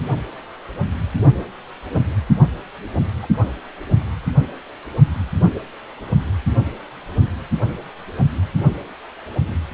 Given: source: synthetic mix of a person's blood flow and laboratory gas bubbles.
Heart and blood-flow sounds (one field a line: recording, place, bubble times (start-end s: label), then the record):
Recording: Doppler ultrasound of blood flow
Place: precordium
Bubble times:
3.22-3.27 s: bubbles
3.41-3.49 s: bubbles
From the record:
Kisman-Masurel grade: 111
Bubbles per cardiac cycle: 1 to 2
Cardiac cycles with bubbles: 1 to 10%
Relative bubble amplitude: barely perceptible (0.100 to 0.250)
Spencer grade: 1 (occasional bubble signal discernible with the cardiac motion signal, with majority of cardiac periods free of bubbles)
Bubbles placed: only in the low amplitude regions of the cardiac cycle